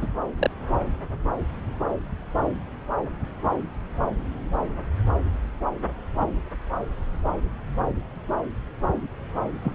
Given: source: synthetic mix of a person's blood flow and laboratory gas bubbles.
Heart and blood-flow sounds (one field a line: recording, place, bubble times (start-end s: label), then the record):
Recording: Doppler ultrasound of blood flow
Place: subclavian vein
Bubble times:
0.01-0.07 s: bubbles
0.38-0.50 s: bubbles
9.64-9.72 s: bubbles
From the record:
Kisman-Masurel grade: 122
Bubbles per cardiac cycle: 1 to 2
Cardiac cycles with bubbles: 10 to 50%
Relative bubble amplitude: moderate (0.250 to 0.450)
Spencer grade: 2 (many but less than half of the cardiac periods contain bubble signals, singularly or in groups)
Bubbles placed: anywhere in the cardiac cycle